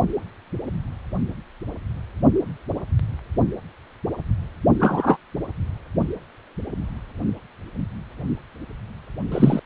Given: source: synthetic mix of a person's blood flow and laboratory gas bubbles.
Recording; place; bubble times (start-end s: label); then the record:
Doppler ultrasound of blood flow; precordium
4.79-5.17 s: bubbles
9.32-9.60 s: bubbles
From the record:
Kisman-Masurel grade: 123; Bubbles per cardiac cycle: 1 to 2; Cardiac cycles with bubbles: 10 to 50%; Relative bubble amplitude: loud (0.450 to 0.775); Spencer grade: 2 (many but less than half of the cardiac periods contain bubble signals, singularly or in groups); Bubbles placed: only in the low amplitude regions of the cardiac cycle